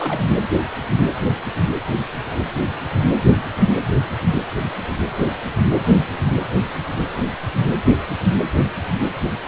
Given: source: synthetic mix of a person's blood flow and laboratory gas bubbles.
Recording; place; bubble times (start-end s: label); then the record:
Doppler ultrasound of blood flow; precordium
0.00-0.21 s: bubbles
From the record:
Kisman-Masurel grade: 211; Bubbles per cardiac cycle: several, 3 to 8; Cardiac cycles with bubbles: 1 to 10%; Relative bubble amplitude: barely perceptible (0.100 to 0.250); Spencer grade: 1 (occasional bubble signal discernible with the cardiac motion signal, with majority of cardiac periods free of bubbles); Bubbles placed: anywhere in the cardiac cycle